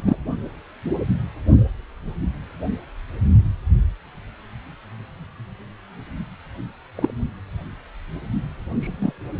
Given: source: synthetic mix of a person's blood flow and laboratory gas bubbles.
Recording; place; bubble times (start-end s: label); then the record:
Doppler ultrasound of blood flow; precordium
0.00-0.17 s: bubbles
6.96-7.11 s: bubbles
8.80-9.12 s: bubbles
From the record:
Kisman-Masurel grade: 122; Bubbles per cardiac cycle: 1 to 2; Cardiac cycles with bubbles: 10 to 50%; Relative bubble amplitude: moderate (0.250 to 0.450); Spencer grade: 2 (many but less than half of the cardiac periods contain bubble signals, singularly or in groups); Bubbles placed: only in the low amplitude regions of the cardiac cycle